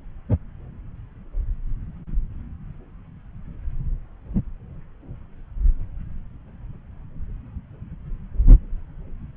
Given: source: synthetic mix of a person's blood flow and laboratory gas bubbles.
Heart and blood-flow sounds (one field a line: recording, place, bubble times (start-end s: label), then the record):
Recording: Doppler ultrasound of blood flow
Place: subclavian vein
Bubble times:
no bubbles
From the record:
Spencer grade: 0 (complete lack of bubble signals)